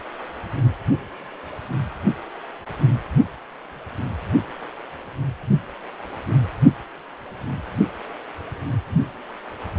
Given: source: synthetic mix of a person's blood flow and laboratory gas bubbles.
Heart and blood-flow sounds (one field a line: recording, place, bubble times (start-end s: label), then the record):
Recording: Doppler ultrasound of blood flow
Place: precordium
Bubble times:
no bubbles
From the record:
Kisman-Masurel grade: 000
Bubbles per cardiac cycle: 0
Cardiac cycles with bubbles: 0%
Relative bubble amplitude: no bubbles discernible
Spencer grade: 0 (complete lack of bubble signals)